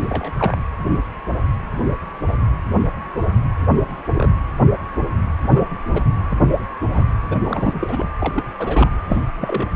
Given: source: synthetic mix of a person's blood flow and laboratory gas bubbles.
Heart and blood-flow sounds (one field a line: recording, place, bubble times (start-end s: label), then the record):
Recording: Doppler ultrasound of blood flow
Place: precordium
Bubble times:
0.02-0.62 s: bubbles
3.74-3.92 s: bubbles
4.15-4.30 s: bubbles
5.39-5.66 s: bubbles
5.84-6.04 s: bubbles
6.29-6.39 s: bubbles
6.87-7.06 s: bubbles
7.30-8.10 s: bubbles
8.20-8.45 s: bubbles
8.58-8.89 s: bubbles
9.07-9.22 s: bubbles
9.38-9.69 s: bubbles
From the record:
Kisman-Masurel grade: 232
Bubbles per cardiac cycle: several, 3 to 8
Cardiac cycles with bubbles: 50 to 99%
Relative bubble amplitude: moderate (0.250 to 0.450)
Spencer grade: 3 (all of the cardiac periods contain showers or single bubble signals, but not dominating or overriding the cardiac motion signals)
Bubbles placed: anywhere in the cardiac cycle